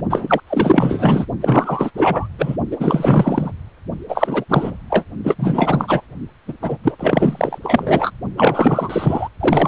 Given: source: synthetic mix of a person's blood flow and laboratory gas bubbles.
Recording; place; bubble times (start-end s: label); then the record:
Doppler ultrasound of blood flow; precordium
0.10-0.40 s: bubbles
0.47-1.25 s: bubbles
1.41-1.91 s: bubbles
1.94-2.28 s: bubbles
2.38-2.57 s: bubbles
2.71-3.52 s: bubbles
4.08-4.45 s: bubbles
4.49-4.76 s: bubbles
4.90-5.05 s: bubbles
5.24-5.36 s: bubbles
5.38-6.01 s: bubbles
6.48-6.54 s: bubbles
6.61-6.78 s: bubbles
6.83-6.96 s: bubbles
7.00-7.58 s: bubbles
7.63-8.11 s: bubbles
8.37-9.29 s: bubbles
9.39-9.68 s: bubbles
From the record:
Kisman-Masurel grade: 444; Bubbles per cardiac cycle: continuous sound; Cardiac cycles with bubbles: 100%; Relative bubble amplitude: maximal (0.775 to 0.999); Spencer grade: 4 (maximum detectable bubble signal sounding continuously throughout systole and diastole of every cardiac period, and overriding the amplitude of the normal cardiac signals); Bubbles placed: only in the low amplitude regions of the cardiac cycle